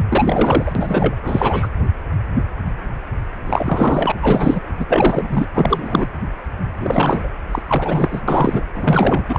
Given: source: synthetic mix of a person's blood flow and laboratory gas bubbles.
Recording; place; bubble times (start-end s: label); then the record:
Doppler ultrasound of blood flow; precordium
0.09-0.72 s: bubbles
0.75-1.16 s: bubbles
1.23-1.68 s: bubbles
3.46-4.12 s: bubbles
4.22-4.60 s: bubbles
4.79-5.46 s: bubbles
5.54-6.07 s: bubbles
6.80-7.28 s: bubbles
7.51-7.62 s: bubbles
7.67-8.21 s: bubbles
8.28-8.63 s: bubbles
8.74-9.25 s: bubbles
9.28-9.39 s: bubbles
From the record:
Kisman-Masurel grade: 333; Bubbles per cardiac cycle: rolling drumbeat, 9 or more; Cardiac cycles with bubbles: 50 to 99%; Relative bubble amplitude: loud (0.450 to 0.775); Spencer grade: 3 (all of the cardiac periods contain showers or single bubble signals, but not dominating or overriding the cardiac motion signals); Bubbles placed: anywhere in the cardiac cycle